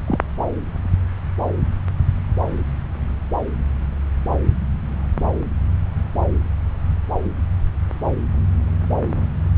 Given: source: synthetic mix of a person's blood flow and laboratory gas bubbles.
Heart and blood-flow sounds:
Doppler ultrasound of blood flow; subclavian vein
0.08-0.20 s: bubbles
From the record:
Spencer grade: 1 (occasional bubble signal discernible with the cardiac motion signal, with majority of cardiac periods free of bubbles); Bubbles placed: anywhere in the cardiac cycle

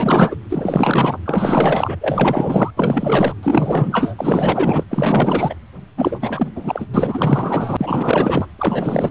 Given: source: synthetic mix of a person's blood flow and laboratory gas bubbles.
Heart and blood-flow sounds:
Doppler ultrasound of blood flow; precordium
0.00-0.36 s: bubbles
0.49-1.18 s: bubbles
1.25-1.97 s: bubbles
2.00-2.71 s: bubbles
2.76-3.34 s: bubbles
3.43-4.14 s: bubbles
4.17-4.83 s: bubbles
4.90-5.55 s: bubbles
5.97-6.49 s: bubbles
6.54-6.86 s: bubbles
6.93-8.46 s: bubbles
8.58-9.11 s: bubbles
From the record:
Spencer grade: 4 (maximum detectable bubble signal sounding continuously throughout systole and diastole of every cardiac period, and overriding the amplitude of the normal cardiac signals); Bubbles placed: anywhere in the cardiac cycle

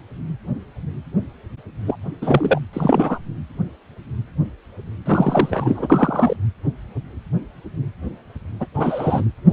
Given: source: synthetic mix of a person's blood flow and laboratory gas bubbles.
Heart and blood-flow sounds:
Doppler ultrasound of blood flow; precordium
1.86-1.97 s: bubbles
2.22-2.60 s: bubbles
2.73-3.19 s: bubbles
5.05-6.36 s: bubbles
8.60-8.67 s: bubbles
8.75-9.26 s: bubbles
9.46-9.53 s: bubbles
From the record:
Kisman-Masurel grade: 223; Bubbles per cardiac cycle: several, 3 to 8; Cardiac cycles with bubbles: 10 to 50%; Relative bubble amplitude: loud (0.450 to 0.775); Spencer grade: 2 (many but less than half of the cardiac periods contain bubble signals, singularly or in groups); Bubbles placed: anywhere in the cardiac cycle

